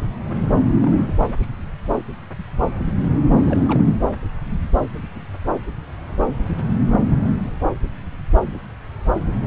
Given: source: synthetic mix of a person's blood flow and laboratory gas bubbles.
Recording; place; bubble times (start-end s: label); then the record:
Doppler ultrasound of blood flow; subclavian vein
0.82-1.33 s: bubbles
1.40-1.47 s: bubbles
3.41-3.92 s: bubbles
From the record:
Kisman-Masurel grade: 211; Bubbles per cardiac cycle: several, 3 to 8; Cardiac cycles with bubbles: 1 to 10%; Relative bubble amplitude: barely perceptible (0.100 to 0.250); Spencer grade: 1 (occasional bubble signal discernible with the cardiac motion signal, with majority of cardiac periods free of bubbles); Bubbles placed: anywhere in the cardiac cycle